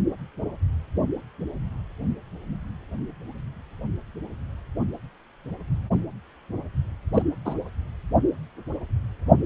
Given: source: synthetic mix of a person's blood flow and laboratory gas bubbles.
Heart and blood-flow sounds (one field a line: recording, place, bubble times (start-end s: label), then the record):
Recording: Doppler ultrasound of blood flow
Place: precordium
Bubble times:
7.14-7.22 s: bubbles
7.45-7.54 s: bubbles
From the record:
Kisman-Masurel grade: 112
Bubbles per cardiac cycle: 1 to 2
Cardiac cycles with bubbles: 1 to 10%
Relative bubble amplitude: moderate (0.250 to 0.450)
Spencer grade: 1 (occasional bubble signal discernible with the cardiac motion signal, with majority of cardiac periods free of bubbles)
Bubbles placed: only in the low amplitude regions of the cardiac cycle